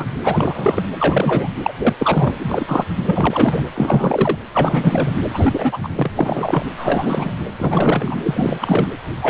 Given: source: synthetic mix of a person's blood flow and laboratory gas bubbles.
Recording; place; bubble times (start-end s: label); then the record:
Doppler ultrasound of blood flow; precordium
0.00-0.07 s: bubbles
0.24-0.83 s: bubbles
0.99-1.48 s: bubbles
1.64-1.72 s: bubbles
1.79-1.94 s: bubbles
1.98-2.33 s: bubbles
2.39-2.86 s: bubbles
3.08-3.65 s: bubbles
3.75-4.37 s: bubbles
4.53-5.11 s: bubbles
5.33-5.77 s: bubbles
5.82-5.89 s: bubbles
5.96-6.11 s: bubbles
6.17-6.66 s: bubbles
6.77-7.31 s: bubbles
7.58-8.19 s: bubbles
8.24-8.88 s: bubbles
9.22-9.29 s: bubbles
From the record:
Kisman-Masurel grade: 343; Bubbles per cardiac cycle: rolling drumbeat, 9 or more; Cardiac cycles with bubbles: 100%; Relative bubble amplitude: loud (0.450 to 0.775); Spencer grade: 3 (all of the cardiac periods contain showers or single bubble signals, but not dominating or overriding the cardiac motion signals); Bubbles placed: anywhere in the cardiac cycle